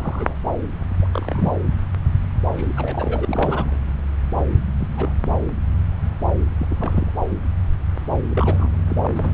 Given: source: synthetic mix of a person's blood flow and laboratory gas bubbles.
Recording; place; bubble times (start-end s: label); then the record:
Doppler ultrasound of blood flow; subclavian vein
0.00-0.35 s: bubbles
1.01-1.07 s: bubbles
1.12-1.52 s: bubbles
2.56-2.73 s: bubbles
2.77-3.80 s: bubbles
4.79-4.88 s: bubbles
4.97-5.10 s: bubbles
6.58-7.11 s: bubbles
8.30-8.68 s: bubbles
8.89-8.96 s: bubbles
9.03-9.07 s: bubbles
9.15-9.34 s: bubbles
From the record:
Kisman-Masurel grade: 221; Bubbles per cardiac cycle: several, 3 to 8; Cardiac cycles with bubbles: 10 to 50%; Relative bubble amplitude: barely perceptible (0.100 to 0.250); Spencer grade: 2 (many but less than half of the cardiac periods contain bubble signals, singularly or in groups); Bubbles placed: anywhere in the cardiac cycle